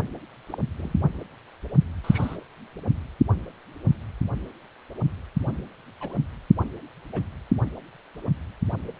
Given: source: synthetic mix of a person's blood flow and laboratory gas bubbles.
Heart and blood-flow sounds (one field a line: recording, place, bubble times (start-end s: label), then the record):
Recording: Doppler ultrasound of blood flow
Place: precordium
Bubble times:
0.48-0.58 s: bubbles
0.78-0.93 s: bubbles
2.04-2.37 s: bubbles
6.00-6.14 s: bubbles
7.12-7.22 s: bubbles
From the record:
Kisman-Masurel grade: 121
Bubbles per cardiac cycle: 1 to 2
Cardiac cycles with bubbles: 10 to 50%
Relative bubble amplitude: barely perceptible (0.100 to 0.250)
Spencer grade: 2 (many but less than half of the cardiac periods contain bubble signals, singularly or in groups)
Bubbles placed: anywhere in the cardiac cycle